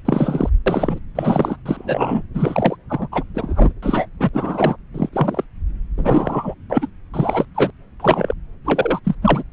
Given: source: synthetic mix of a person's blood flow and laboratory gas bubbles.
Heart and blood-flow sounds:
Doppler ultrasound of blood flow; subclavian vein
0.05-0.50 s: bubbles
0.66-0.99 s: bubbles
1.15-1.56 s: bubbles
1.66-2.22 s: bubbles
2.34-2.77 s: bubbles
2.89-3.08 s: bubbles
3.11-3.25 s: bubbles
3.34-3.73 s: bubbles
3.82-4.08 s: bubbles
4.19-4.29 s: bubbles
4.33-4.77 s: bubbles
4.94-5.09 s: bubbles
5.12-5.44 s: bubbles
5.97-6.54 s: bubbles
6.70-6.88 s: bubbles
7.14-7.45 s: bubbles
7.55-7.71 s: bubbles
8.00-8.33 s: bubbles
8.64-8.99 s: bubbles
9.04-9.15 s: bubbles
9.21-9.43 s: bubbles
From the record:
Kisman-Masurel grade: 233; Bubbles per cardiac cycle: several, 3 to 8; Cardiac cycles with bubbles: 50 to 99%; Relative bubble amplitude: loud (0.450 to 0.775); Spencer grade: 3 (all of the cardiac periods contain showers or single bubble signals, but not dominating or overriding the cardiac motion signals); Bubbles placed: anywhere in the cardiac cycle

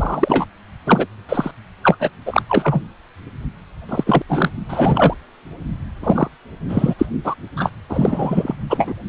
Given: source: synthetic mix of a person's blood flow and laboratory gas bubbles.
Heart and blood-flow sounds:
Doppler ultrasound of blood flow; precordium
0.00-0.45 s: bubbles
0.86-1.06 s: bubbles
1.29-1.51 s: bubbles
1.83-2.10 s: bubbles
2.25-2.42 s: bubbles
2.47-2.82 s: bubbles
3.89-4.03 s: bubbles
4.06-4.22 s: bubbles
4.28-4.50 s: bubbles
4.68-5.13 s: bubbles
6.03-6.28 s: bubbles
6.68-6.94 s: bubbles
6.98-7.05 s: bubbles
7.24-7.34 s: bubbles
7.56-7.71 s: bubbles
7.89-8.55 s: bubbles
8.70-8.95 s: bubbles
From the record:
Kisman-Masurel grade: 243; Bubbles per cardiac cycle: several, 3 to 8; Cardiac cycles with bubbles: 100%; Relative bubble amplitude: loud (0.450 to 0.775); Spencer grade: 3 (all of the cardiac periods contain showers or single bubble signals, but not dominating or overriding the cardiac motion signals); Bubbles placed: only in the low amplitude regions of the cardiac cycle

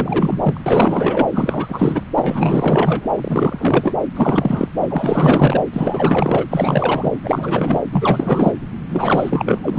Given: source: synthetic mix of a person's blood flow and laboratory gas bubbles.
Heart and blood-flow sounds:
Doppler ultrasound of blood flow; subclavian vein
0.00-0.60 s: bubbles
0.66-1.27 s: bubbles
1.30-2.04 s: bubbles
2.16-3.08 s: bubbles
3.14-3.96 s: bubbles
4.16-4.68 s: bubbles
4.80-5.63 s: bubbles
5.72-6.46 s: bubbles
6.50-7.17 s: bubbles
7.22-7.85 s: bubbles
7.92-8.53 s: bubbles
8.90-9.60 s: bubbles
9.62-9.79 s: bubbles
From the record:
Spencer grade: 4 (maximum detectable bubble signal sounding continuously throughout systole and diastole of every cardiac period, and overriding the amplitude of the normal cardiac signals); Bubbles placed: anywhere in the cardiac cycle

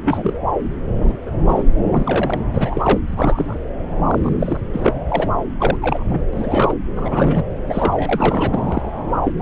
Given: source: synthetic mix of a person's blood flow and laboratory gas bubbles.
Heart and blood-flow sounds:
Doppler ultrasound of blood flow; subclavian vein
0.03-0.34 s: bubbles
1.01-1.18 s: bubbles
1.26-1.30 s: bubbles
1.47-1.64 s: bubbles
1.91-2.38 s: bubbles
2.52-2.99 s: bubbles
3.07-3.59 s: bubbles
4.08-4.60 s: bubbles
4.72-4.94 s: bubbles
5.08-5.28 s: bubbles
5.58-5.77 s: bubbles
5.82-6.18 s: bubbles
6.33-6.75 s: bubbles
6.96-7.44 s: bubbles
7.67-8.47 s: bubbles
8.51-9.04 s: bubbles
9.24-9.32 s: bubbles
9.37-9.42 s: bubbles
From the record:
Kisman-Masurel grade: 242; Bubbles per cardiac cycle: several, 3 to 8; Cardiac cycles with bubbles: 100%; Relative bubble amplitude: moderate (0.250 to 0.450); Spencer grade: 3 (all of the cardiac periods contain showers or single bubble signals, but not dominating or overriding the cardiac motion signals); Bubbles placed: anywhere in the cardiac cycle

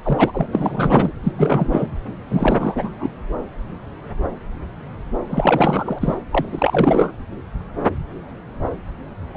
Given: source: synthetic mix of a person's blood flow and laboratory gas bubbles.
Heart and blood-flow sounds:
Doppler ultrasound of blood flow; subclavian vein
0.04-0.47 s: bubbles
0.53-1.12 s: bubbles
1.23-1.32 s: bubbles
1.38-1.88 s: bubbles
2.30-2.90 s: bubbles
2.99-3.10 s: bubbles
5.25-6.17 s: bubbles
6.31-7.12 s: bubbles
9.34-9.37 s: bubbles
From the record:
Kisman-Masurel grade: 333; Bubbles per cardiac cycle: rolling drumbeat, 9 or more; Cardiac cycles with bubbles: 50 to 99%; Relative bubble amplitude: loud (0.450 to 0.775); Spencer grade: 3 (all of the cardiac periods contain showers or single bubble signals, but not dominating or overriding the cardiac motion signals); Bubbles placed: anywhere in the cardiac cycle

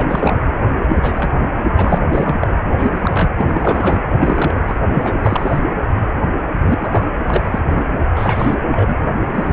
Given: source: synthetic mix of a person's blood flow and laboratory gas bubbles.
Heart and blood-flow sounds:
Doppler ultrasound of blood flow; precordium
0.00-0.39 s: bubbles
0.89-1.31 s: bubbles
1.76-1.98 s: bubbles
2.12-2.35 s: bubbles
2.40-2.48 s: bubbles
2.77-3.29 s: bubbles
3.38-4.04 s: bubbles
4.14-4.75 s: bubbles
4.91-5.60 s: bubbles
6.62-7.08 s: bubbles
7.26-7.59 s: bubbles
7.70-7.82 s: bubbles
8.15-8.55 s: bubbles
8.70-8.96 s: bubbles
9.32-9.53 s: bubbles
From the record:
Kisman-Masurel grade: 232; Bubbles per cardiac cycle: several, 3 to 8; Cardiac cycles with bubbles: 50 to 99%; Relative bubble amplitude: moderate (0.250 to 0.450); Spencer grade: 3 (all of the cardiac periods contain showers or single bubble signals, but not dominating or overriding the cardiac motion signals); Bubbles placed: anywhere in the cardiac cycle

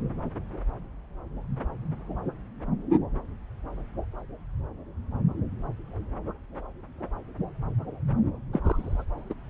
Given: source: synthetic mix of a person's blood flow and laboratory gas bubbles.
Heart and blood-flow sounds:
Doppler ultrasound of blood flow; subclavian vein
8.53-8.59 s: bubbles
8.64-9.04 s: bubbles
9.30-9.33 s: bubbles
From the record:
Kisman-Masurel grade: 212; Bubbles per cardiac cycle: several, 3 to 8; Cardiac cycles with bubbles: 1 to 10%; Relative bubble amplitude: moderate (0.250 to 0.450); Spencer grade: 1 (occasional bubble signal discernible with the cardiac motion signal, with majority of cardiac periods free of bubbles); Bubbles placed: anywhere in the cardiac cycle

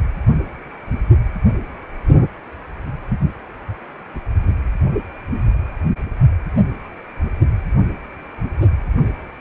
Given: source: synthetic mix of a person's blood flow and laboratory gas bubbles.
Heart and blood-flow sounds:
Doppler ultrasound of blood flow; precordium
no bubbles
From the record:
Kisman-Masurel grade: 000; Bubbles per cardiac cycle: 0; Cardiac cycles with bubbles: 0%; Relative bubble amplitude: no bubbles discernible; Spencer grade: 0 (complete lack of bubble signals)

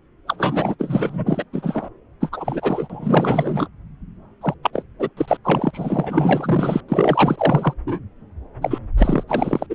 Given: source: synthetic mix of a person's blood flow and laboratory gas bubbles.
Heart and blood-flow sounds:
Doppler ultrasound of blood flow; subclavian vein
0.27-0.76 s: bubbles
0.78-1.44 s: bubbles
1.52-1.89 s: bubbles
2.20-3.68 s: bubbles
4.41-4.54 s: bubbles
4.62-4.83 s: bubbles
4.99-5.09 s: bubbles
5.17-5.37 s: bubbles
5.44-5.71 s: bubbles
5.73-6.80 s: bubbles
6.88-7.73 s: bubbles
7.86-7.99 s: bubbles
8.62-8.79 s: bubbles
8.98-9.24 s: bubbles
9.28-9.67 s: bubbles
9.70-9.75 s: bubbles
From the record:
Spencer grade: 4 (maximum detectable bubble signal sounding continuously throughout systole and diastole of every cardiac period, and overriding the amplitude of the normal cardiac signals); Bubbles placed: anywhere in the cardiac cycle

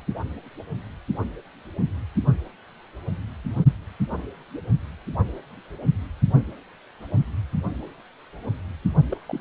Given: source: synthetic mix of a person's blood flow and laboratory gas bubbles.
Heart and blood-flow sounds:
Doppler ultrasound of blood flow; precordium
9.09-9.17 s: bubbles
9.26-9.40 s: bubbles
From the record:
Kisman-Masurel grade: 211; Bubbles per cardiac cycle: several, 3 to 8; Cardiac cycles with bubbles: 1 to 10%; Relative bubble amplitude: barely perceptible (0.100 to 0.250); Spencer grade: 1 (occasional bubble signal discernible with the cardiac motion signal, with majority of cardiac periods free of bubbles); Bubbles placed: only in the low amplitude regions of the cardiac cycle

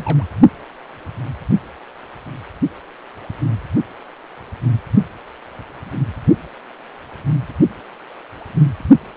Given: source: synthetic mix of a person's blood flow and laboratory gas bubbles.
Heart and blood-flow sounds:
Doppler ultrasound of blood flow; precordium
0.00-0.23 s: bubbles
From the record:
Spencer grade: 2 (many but less than half of the cardiac periods contain bubble signals, singularly or in groups); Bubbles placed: only in the low amplitude regions of the cardiac cycle

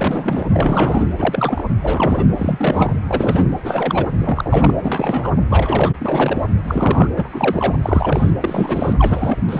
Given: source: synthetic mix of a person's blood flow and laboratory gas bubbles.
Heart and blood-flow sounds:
Doppler ultrasound of blood flow; precordium
0.00-0.45 s: bubbles
0.52-1.06 s: bubbles
1.18-1.64 s: bubbles
1.82-2.24 s: bubbles
2.36-2.96 s: bubbles
3.07-3.46 s: bubbles
3.64-4.05 s: bubbles
4.19-4.72 s: bubbles
4.79-5.30 s: bubbles
5.50-5.92 s: bubbles
5.98-6.47 s: bubbles
6.67-7.07 s: bubbles
7.15-7.76 s: bubbles
7.82-8.30 s: bubbles
8.40-8.93 s: bubbles
8.98-9.38 s: bubbles
9.48-9.60 s: bubbles
From the record:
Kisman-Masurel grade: 342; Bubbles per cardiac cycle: rolling drumbeat, 9 or more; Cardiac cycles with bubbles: 100%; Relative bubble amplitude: moderate (0.250 to 0.450); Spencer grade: 3 (all of the cardiac periods contain showers or single bubble signals, but not dominating or overriding the cardiac motion signals); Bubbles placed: anywhere in the cardiac cycle

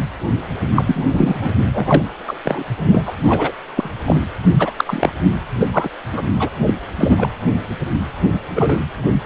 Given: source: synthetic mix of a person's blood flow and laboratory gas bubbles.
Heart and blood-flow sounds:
Doppler ultrasound of blood flow; precordium
0.75-1.54 s: bubbles
1.73-2.03 s: bubbles
2.27-2.37 s: bubbles
2.44-2.64 s: bubbles
2.88-3.02 s: bubbles
3.06-3.13 s: bubbles
3.20-3.52 s: bubbles
3.76-3.91 s: bubbles
4.04-4.21 s: bubbles
4.58-4.72 s: bubbles
4.76-5.12 s: bubbles
5.60-5.90 s: bubbles
6.13-6.22 s: bubbles
6.39-6.50 s: bubbles
6.67-6.74 s: bubbles
6.96-7.29 s: bubbles
8.55-8.77 s: bubbles
From the record:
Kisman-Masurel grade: 243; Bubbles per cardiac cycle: several, 3 to 8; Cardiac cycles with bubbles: 100%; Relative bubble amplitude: loud (0.450 to 0.775); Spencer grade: 3 (all of the cardiac periods contain showers or single bubble signals, but not dominating or overriding the cardiac motion signals); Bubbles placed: anywhere in the cardiac cycle

